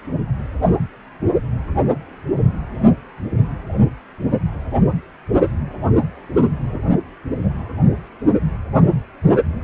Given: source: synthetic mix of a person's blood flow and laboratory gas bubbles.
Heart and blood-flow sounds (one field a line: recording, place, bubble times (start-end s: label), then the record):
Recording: Doppler ultrasound of blood flow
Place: precordium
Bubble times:
6.64-6.78 s: bubbles
7.43-7.50 s: bubbles
From the record:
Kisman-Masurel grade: 111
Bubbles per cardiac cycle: 1 to 2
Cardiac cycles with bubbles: 1 to 10%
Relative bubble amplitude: barely perceptible (0.100 to 0.250)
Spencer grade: 1 (occasional bubble signal discernible with the cardiac motion signal, with majority of cardiac periods free of bubbles)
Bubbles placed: only in the low amplitude regions of the cardiac cycle